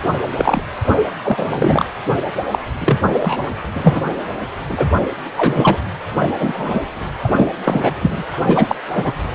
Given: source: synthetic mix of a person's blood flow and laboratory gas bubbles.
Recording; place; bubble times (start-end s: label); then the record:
Doppler ultrasound of blood flow; precordium
0.36-0.62 s: bubbles
1.24-1.47 s: bubbles
1.50-1.85 s: bubbles
2.50-2.59 s: bubbles
2.80-2.97 s: bubbles
3.20-3.51 s: bubbles
3.75-4.01 s: bubbles
4.69-4.87 s: bubbles
5.37-5.79 s: bubbles
6.09-6.36 s: bubbles
6.39-6.80 s: bubbles
7.23-7.50 s: bubbles
7.64-7.95 s: bubbles
8.02-8.23 s: bubbles
8.46-8.75 s: bubbles
8.93-9.12 s: bubbles
From the record:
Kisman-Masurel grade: 243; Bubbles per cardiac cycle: several, 3 to 8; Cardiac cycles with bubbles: 100%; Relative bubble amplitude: loud (0.450 to 0.775); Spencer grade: 3 (all of the cardiac periods contain showers or single bubble signals, but not dominating or overriding the cardiac motion signals); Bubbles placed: anywhere in the cardiac cycle